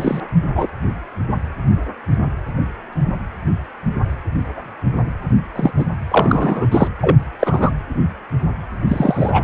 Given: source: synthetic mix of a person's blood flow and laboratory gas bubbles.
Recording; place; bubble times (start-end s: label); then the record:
Doppler ultrasound of blood flow; precordium
0.00-0.20 s: bubbles
0.55-0.66 s: bubbles
5.56-5.71 s: bubbles
5.76-5.86 s: bubbles
6.11-6.66 s: bubbles
6.71-6.88 s: bubbles
7.00-7.17 s: bubbles
7.40-7.71 s: bubbles
8.88-9.43 s: bubbles
From the record:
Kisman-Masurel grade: 223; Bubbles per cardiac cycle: several, 3 to 8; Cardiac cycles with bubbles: 10 to 50%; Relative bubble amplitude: loud (0.450 to 0.775); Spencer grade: 2 (many but less than half of the cardiac periods contain bubble signals, singularly or in groups); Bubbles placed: anywhere in the cardiac cycle